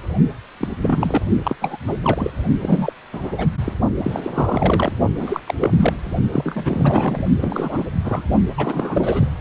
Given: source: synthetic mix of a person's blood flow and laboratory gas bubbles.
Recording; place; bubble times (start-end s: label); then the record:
Doppler ultrasound of blood flow; precordium
0.59-0.68 s: bubbles
0.80-1.22 s: bubbles
1.43-1.56 s: bubbles
1.61-1.78 s: bubbles
1.87-1.97 s: bubbles
2.02-2.30 s: bubbles
2.60-2.92 s: bubbles
3.12-3.47 s: bubbles
3.64-3.74 s: bubbles
4.03-4.20 s: bubbles
4.23-4.92 s: bubbles
5.15-5.40 s: bubbles
5.46-5.54 s: bubbles
5.60-5.94 s: bubbles
6.32-7.25 s: bubbles
7.41-7.85 s: bubbles
8.04-8.22 s: bubbles
8.57-9.31 s: bubbles
From the record:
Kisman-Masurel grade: 342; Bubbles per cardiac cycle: rolling drumbeat, 9 or more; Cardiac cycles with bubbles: 100%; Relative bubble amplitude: moderate (0.250 to 0.450); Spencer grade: 3 (all of the cardiac periods contain showers or single bubble signals, but not dominating or overriding the cardiac motion signals); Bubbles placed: only in the low amplitude regions of the cardiac cycle